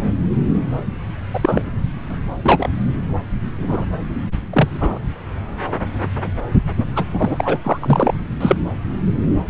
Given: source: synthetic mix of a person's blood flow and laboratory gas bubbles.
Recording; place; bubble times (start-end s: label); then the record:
Doppler ultrasound of blood flow; subclavian vein
1.33-1.70 s: bubbles
2.10-2.16 s: bubbles
2.42-2.69 s: bubbles
3.61-3.85 s: bubbles
4.53-4.68 s: bubbles
4.80-4.99 s: bubbles
6.96-7.04 s: bubbles
7.12-7.58 s: bubbles
7.64-8.14 s: bubbles
8.40-8.56 s: bubbles
From the record:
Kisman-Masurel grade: 233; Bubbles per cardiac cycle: several, 3 to 8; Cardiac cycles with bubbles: 50 to 99%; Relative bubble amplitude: loud (0.450 to 0.775); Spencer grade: 3 (all of the cardiac periods contain showers or single bubble signals, but not dominating or overriding the cardiac motion signals); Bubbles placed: anywhere in the cardiac cycle